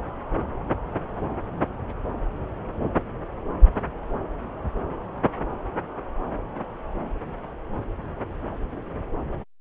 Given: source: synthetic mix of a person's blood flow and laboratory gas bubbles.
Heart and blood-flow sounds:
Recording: Doppler ultrasound of blood flow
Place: subclavian vein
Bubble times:
no bubbles
From the record:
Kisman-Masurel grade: 000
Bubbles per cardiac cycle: 0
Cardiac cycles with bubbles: 0%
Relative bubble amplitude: no bubbles discernible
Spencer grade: 0 (complete lack of bubble signals)

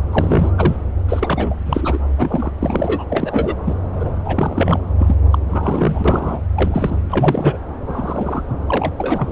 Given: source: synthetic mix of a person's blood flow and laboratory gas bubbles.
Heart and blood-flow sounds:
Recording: Doppler ultrasound of blood flow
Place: subclavian vein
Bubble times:
0.12-0.51 s: bubbles
0.56-0.77 s: bubbles
1.09-1.55 s: bubbles
1.66-1.99 s: bubbles
2.17-2.51 s: bubbles
2.60-3.04 s: bubbles
3.09-3.55 s: bubbles
3.65-3.75 s: bubbles
3.95-4.10 s: bubbles
4.25-4.79 s: bubbles
4.98-5.17 s: bubbles
5.30-5.38 s: bubbles
5.48-6.39 s: bubbles
6.54-6.96 s: bubbles
7.08-7.58 s: bubbles
7.86-8.42 s: bubbles
8.68-8.93 s: bubbles
8.98-9.32 s: bubbles
From the record:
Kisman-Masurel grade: 243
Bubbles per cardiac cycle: several, 3 to 8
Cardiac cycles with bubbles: 100%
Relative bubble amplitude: loud (0.450 to 0.775)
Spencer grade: 3 (all of the cardiac periods contain showers or single bubble signals, but not dominating or overriding the cardiac motion signals)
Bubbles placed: anywhere in the cardiac cycle

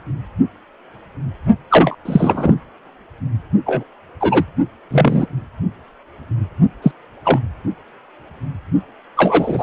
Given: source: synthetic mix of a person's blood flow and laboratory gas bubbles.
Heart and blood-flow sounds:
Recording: Doppler ultrasound of blood flow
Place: precordium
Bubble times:
1.70-1.95 s: bubbles
2.05-2.55 s: bubbles
3.66-3.84 s: bubbles
4.20-4.45 s: bubbles
4.90-5.26 s: bubbles
6.82-6.92 s: bubbles
7.25-7.40 s: bubbles
9.16-9.63 s: bubbles
From the record:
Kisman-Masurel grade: 223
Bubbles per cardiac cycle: several, 3 to 8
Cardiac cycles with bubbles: 10 to 50%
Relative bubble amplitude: loud (0.450 to 0.775)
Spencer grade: 2 (many but less than half of the cardiac periods contain bubble signals, singularly or in groups)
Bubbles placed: only in the low amplitude regions of the cardiac cycle

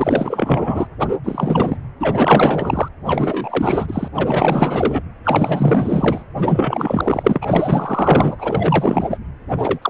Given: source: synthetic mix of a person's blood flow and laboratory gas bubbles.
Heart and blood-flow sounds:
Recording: Doppler ultrasound of blood flow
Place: precordium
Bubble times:
0.00-0.87 s: bubbles
0.99-1.08 s: bubbles
1.24-1.77 s: bubbles
2.00-2.88 s: bubbles
3.06-4.08 s: bubbles
4.16-5.02 s: bubbles
5.24-6.24 s: bubbles
6.37-7.39 s: bubbles
7.41-9.19 s: bubbles
9.51-9.90 s: bubbles
From the record:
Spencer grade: 4 (maximum detectable bubble signal sounding continuously throughout systole and diastole of every cardiac period, and overriding the amplitude of the normal cardiac signals)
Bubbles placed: anywhere in the cardiac cycle

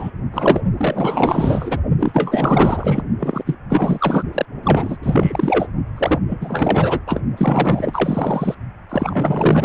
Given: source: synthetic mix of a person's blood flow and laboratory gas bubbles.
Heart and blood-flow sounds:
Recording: Doppler ultrasound of blood flow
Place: precordium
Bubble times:
0.00-0.11 s: bubbles
0.32-0.60 s: bubbles
0.77-1.77 s: bubbles
1.99-3.02 s: bubbles
3.20-3.43 s: bubbles
3.46-3.55 s: bubbles
3.70-4.23 s: bubbles
4.33-4.46 s: bubbles
4.63-4.97 s: bubbles
5.02-5.67 s: bubbles
5.96-6.19 s: bubbles
6.27-7.00 s: bubbles
7.06-7.21 s: bubbles
7.37-8.55 s: bubbles
8.89-9.65 s: bubbles
From the record:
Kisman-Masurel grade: 444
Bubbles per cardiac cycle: continuous sound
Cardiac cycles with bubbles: 100%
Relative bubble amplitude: maximal (0.775 to 0.999)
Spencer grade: 4 (maximum detectable bubble signal sounding continuously throughout systole and diastole of every cardiac period, and overriding the amplitude of the normal cardiac signals)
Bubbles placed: only in the low amplitude regions of the cardiac cycle

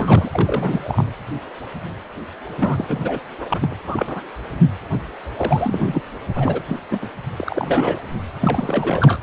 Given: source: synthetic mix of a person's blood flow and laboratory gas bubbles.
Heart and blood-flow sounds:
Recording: Doppler ultrasound of blood flow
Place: precordium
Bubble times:
0.00-0.29 s: bubbles
0.33-1.05 s: bubbles
2.55-3.22 s: bubbles
3.38-3.75 s: bubbles
3.87-4.22 s: bubbles
5.37-6.03 s: bubbles
6.35-6.62 s: bubbles
6.67-6.79 s: bubbles
6.91-7.09 s: bubbles
7.36-8.00 s: bubbles
8.39-9.19 s: bubbles
From the record:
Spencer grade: 3 (all of the cardiac periods contain showers or single bubble signals, but not dominating or overriding the cardiac motion signals)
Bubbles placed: anywhere in the cardiac cycle

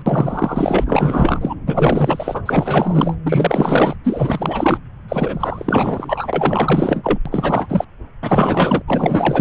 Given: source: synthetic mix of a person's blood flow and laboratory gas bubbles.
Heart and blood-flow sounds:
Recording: Doppler ultrasound of blood flow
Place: subclavian vein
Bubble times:
0.00-0.02 s: bubbles
0.06-1.55 s: bubbles
1.67-2.42 s: bubbles
2.46-3.15 s: bubbles
3.25-3.96 s: bubbles
4.04-4.79 s: bubbles
5.08-7.18 s: bubbles
7.25-7.85 s: bubbles
8.21-8.82 s: bubbles
8.87-9.41 s: bubbles
From the record:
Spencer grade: 4 (maximum detectable bubble signal sounding continuously throughout systole and diastole of every cardiac period, and overriding the amplitude of the normal cardiac signals)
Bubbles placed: anywhere in the cardiac cycle

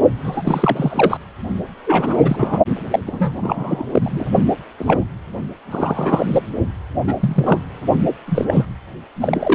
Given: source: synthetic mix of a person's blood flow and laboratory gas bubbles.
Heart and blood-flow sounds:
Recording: Doppler ultrasound of blood flow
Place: precordium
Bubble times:
0.23-0.42 s: bubbles
0.45-1.18 s: bubbles
1.86-2.58 s: bubbles
2.90-2.99 s: bubbles
3.06-3.35 s: bubbles
3.40-4.27 s: bubbles
4.78-5.04 s: bubbles
5.71-6.26 s: bubbles
6.29-6.42 s: bubbles
7.06-7.16 s: bubbles
7.19-7.60 s: bubbles
8.26-8.45 s: bubbles
8.48-8.65 s: bubbles
9.20-9.55 s: bubbles
From the record:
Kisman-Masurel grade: 243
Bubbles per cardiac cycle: several, 3 to 8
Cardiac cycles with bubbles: 100%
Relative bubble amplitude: loud (0.450 to 0.775)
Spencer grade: 3 (all of the cardiac periods contain showers or single bubble signals, but not dominating or overriding the cardiac motion signals)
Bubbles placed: only in the low amplitude regions of the cardiac cycle

